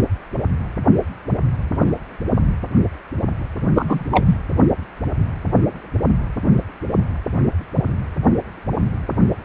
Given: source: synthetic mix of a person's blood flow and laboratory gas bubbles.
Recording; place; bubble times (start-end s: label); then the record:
Doppler ultrasound of blood flow; precordium
3.75-4.04 s: bubbles
4.11-4.36 s: bubbles
From the record:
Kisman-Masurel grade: 213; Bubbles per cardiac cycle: several, 3 to 8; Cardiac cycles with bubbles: 1 to 10%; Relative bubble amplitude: loud (0.450 to 0.775); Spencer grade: 1 (occasional bubble signal discernible with the cardiac motion signal, with majority of cardiac periods free of bubbles); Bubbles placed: anywhere in the cardiac cycle